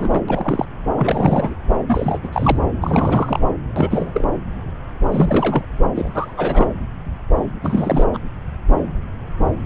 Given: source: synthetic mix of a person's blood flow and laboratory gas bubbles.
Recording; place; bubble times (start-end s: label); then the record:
Doppler ultrasound of blood flow; subclavian vein
0.00-0.21 s: bubbles
0.28-0.66 s: bubbles
0.97-1.54 s: bubbles
1.87-2.19 s: bubbles
2.23-2.28 s: bubbles
2.32-2.56 s: bubbles
2.81-3.40 s: bubbles
3.76-4.30 s: bubbles
5.12-5.62 s: bubbles
5.95-6.34 s: bubbles
6.37-6.67 s: bubbles
7.62-8.04 s: bubbles
8.13-8.19 s: bubbles
From the record:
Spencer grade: 3 (all of the cardiac periods contain showers or single bubble signals, but not dominating or overriding the cardiac motion signals); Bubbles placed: anywhere in the cardiac cycle